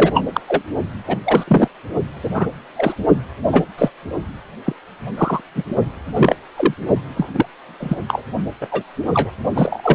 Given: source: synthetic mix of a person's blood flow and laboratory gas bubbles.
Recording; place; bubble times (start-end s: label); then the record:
Doppler ultrasound of blood flow; precordium
0.00-0.27 s: bubbles
0.33-0.40 s: bubbles
0.48-0.64 s: bubbles
1.07-1.19 s: bubbles
1.24-1.44 s: bubbles
1.48-1.69 s: bubbles
2.23-2.29 s: bubbles
2.34-2.47 s: bubbles
2.76-2.95 s: bubbles
3.52-3.65 s: bubbles
3.78-3.90 s: bubbles
4.65-4.73 s: bubbles
5.17-5.41 s: bubbles
5.55-5.63 s: bubbles
6.15-6.36 s: bubbles
6.56-6.74 s: bubbles
7.17-7.31 s: bubbles
7.34-7.46 s: bubbles
7.79-7.96 s: bubbles
8.08-8.23 s: bubbles
8.61-8.83 s: bubbles
9.10-9.31 s: bubbles
9.54-9.95 s: bubbles
From the record:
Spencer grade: 3 (all of the cardiac periods contain showers or single bubble signals, but not dominating or overriding the cardiac motion signals); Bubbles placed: only in the low amplitude regions of the cardiac cycle